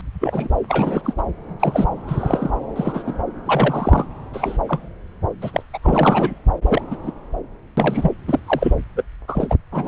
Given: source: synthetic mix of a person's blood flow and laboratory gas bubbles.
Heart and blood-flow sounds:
Doppler ultrasound of blood flow; subclavian vein
0.20-0.49 s: bubbles
0.68-1.13 s: bubbles
1.17-1.22 s: bubbles
1.59-1.87 s: bubbles
2.07-2.50 s: bubbles
2.75-3.19 s: bubbles
3.44-4.05 s: bubbles
4.33-4.58 s: bubbles
4.67-4.88 s: bubbles
5.42-5.62 s: bubbles
5.73-5.78 s: bubbles
5.83-6.38 s: bubbles
6.68-6.81 s: bubbles
6.91-6.96 s: bubbles
7.04-7.12 s: bubbles
7.77-8.12 s: bubbles
8.28-8.39 s: bubbles
8.46-8.73 s: bubbles
8.96-9.04 s: bubbles
9.28-9.55 s: bubbles
9.71-9.88 s: bubbles
From the record:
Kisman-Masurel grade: 243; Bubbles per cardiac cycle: several, 3 to 8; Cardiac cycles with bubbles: 100%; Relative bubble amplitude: loud (0.450 to 0.775); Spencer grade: 3 (all of the cardiac periods contain showers or single bubble signals, but not dominating or overriding the cardiac motion signals); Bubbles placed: anywhere in the cardiac cycle

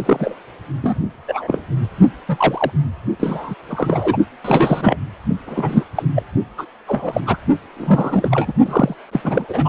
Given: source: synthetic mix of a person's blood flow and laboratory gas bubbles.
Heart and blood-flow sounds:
Doppler ultrasound of blood flow; precordium
0.05-0.36 s: bubbles
0.81-0.98 s: bubbles
1.28-1.61 s: bubbles
2.28-2.71 s: bubbles
3.19-3.54 s: bubbles
3.69-4.17 s: bubbles
4.44-4.96 s: bubbles
5.46-5.85 s: bubbles
5.95-6.03 s: bubbles
6.15-6.23 s: bubbles
6.57-6.65 s: bubbles
6.87-7.20 s: bubbles
7.26-7.37 s: bubbles
7.76-8.53 s: bubbles
8.65-8.95 s: bubbles
9.11-9.21 s: bubbles
9.24-9.46 s: bubbles
9.49-9.69 s: bubbles
From the record:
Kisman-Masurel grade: 243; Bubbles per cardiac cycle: several, 3 to 8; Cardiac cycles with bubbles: 100%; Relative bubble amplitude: loud (0.450 to 0.775); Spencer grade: 3 (all of the cardiac periods contain showers or single bubble signals, but not dominating or overriding the cardiac motion signals); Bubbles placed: only in the low amplitude regions of the cardiac cycle

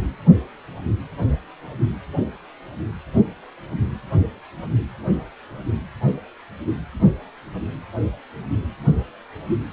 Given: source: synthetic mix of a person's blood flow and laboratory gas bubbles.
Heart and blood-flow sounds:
Doppler ultrasound of blood flow; precordium
no bubbles
From the record:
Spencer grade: 0 (complete lack of bubble signals)

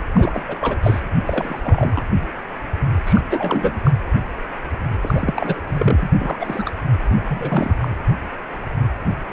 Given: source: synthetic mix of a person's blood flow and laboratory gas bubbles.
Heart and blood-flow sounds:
Doppler ultrasound of blood flow; precordium
0.14-0.42 s: bubbles
0.48-0.55 s: bubbles
0.60-0.77 s: bubbles
0.82-1.00 s: bubbles
1.25-2.03 s: bubbles
3.06-3.22 s: bubbles
3.27-3.79 s: bubbles
3.84-3.91 s: bubbles
5.01-5.61 s: bubbles
5.68-6.11 s: bubbles
6.21-6.71 s: bubbles
7.10-7.16 s: bubbles
7.28-7.75 s: bubbles
7.80-7.88 s: bubbles
From the record:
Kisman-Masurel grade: 332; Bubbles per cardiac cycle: rolling drumbeat, 9 or more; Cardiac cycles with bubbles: 50 to 99%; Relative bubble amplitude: moderate (0.250 to 0.450); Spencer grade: 3 (all of the cardiac periods contain showers or single bubble signals, but not dominating or overriding the cardiac motion signals); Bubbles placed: anywhere in the cardiac cycle

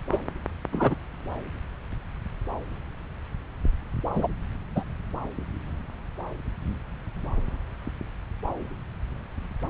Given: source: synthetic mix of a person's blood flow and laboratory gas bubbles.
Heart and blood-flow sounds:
Doppler ultrasound of blood flow; subclavian vein
0.12-0.18 s: bubbles
0.72-0.95 s: bubbles
4.14-4.27 s: bubbles
4.75-4.83 s: bubbles
From the record:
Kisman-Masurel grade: 123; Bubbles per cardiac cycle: 1 to 2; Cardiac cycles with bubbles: 10 to 50%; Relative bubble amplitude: loud (0.450 to 0.775); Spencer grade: 2 (many but less than half of the cardiac periods contain bubble signals, singularly or in groups); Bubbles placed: anywhere in the cardiac cycle

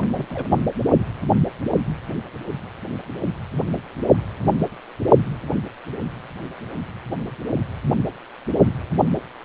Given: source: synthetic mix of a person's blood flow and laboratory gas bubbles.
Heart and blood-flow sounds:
Doppler ultrasound of blood flow; precordium
0.00-0.26 s: bubbles
0.30-0.47 s: bubbles
0.50-0.57 s: bubbles
From the record:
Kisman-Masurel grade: 221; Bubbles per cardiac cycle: several, 3 to 8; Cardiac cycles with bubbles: 10 to 50%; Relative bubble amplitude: barely perceptible (0.100 to 0.250); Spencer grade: 2 (many but less than half of the cardiac periods contain bubble signals, singularly or in groups); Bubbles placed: only in the low amplitude regions of the cardiac cycle

